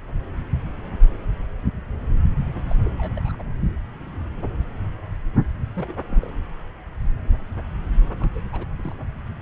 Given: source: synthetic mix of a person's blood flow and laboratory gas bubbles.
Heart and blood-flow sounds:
Doppler ultrasound of blood flow; subclavian vein
2.48-2.76 s: bubbles
2.84-2.89 s: bubbles
2.98-3.13 s: bubbles
3.16-3.43 s: bubbles
5.75-6.00 s: bubbles
6.08-6.30 s: bubbles
8.20-8.29 s: bubbles
8.35-8.40 s: bubbles
8.53-8.66 s: bubbles
8.76-8.96 s: bubbles
From the record:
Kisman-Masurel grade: 221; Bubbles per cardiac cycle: several, 3 to 8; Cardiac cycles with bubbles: 10 to 50%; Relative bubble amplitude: barely perceptible (0.100 to 0.250); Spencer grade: 2 (many but less than half of the cardiac periods contain bubble signals, singularly or in groups); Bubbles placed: anywhere in the cardiac cycle

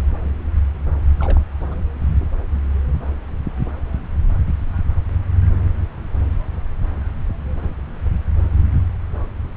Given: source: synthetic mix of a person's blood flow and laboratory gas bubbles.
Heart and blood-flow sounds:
Doppler ultrasound of blood flow; subclavian vein
1.18-1.41 s: bubbles
1.62-1.75 s: bubbles
From the record:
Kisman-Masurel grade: 211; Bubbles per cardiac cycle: several, 3 to 8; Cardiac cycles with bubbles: 1 to 10%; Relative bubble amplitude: barely perceptible (0.100 to 0.250); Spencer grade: 1 (occasional bubble signal discernible with the cardiac motion signal, with majority of cardiac periods free of bubbles); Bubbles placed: anywhere in the cardiac cycle

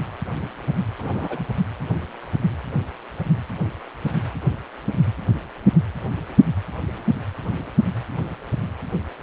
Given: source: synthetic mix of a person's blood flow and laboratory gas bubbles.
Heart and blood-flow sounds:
Doppler ultrasound of blood flow; precordium
0.98-1.44 s: bubbles
From the record:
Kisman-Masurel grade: 211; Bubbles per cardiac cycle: several, 3 to 8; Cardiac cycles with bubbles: 1 to 10%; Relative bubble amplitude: barely perceptible (0.100 to 0.250); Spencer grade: 1 (occasional bubble signal discernible with the cardiac motion signal, with majority of cardiac periods free of bubbles); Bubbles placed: anywhere in the cardiac cycle

